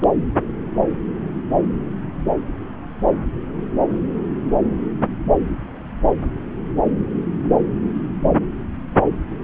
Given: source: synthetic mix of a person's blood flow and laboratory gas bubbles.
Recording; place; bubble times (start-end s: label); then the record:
Doppler ultrasound of blood flow; subclavian vein
0.02-0.05 s: bubbles
From the record:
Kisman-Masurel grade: 111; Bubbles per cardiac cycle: 1 to 2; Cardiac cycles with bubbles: 1 to 10%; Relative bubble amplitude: barely perceptible (0.100 to 0.250); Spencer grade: 1 (occasional bubble signal discernible with the cardiac motion signal, with majority of cardiac periods free of bubbles); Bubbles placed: anywhere in the cardiac cycle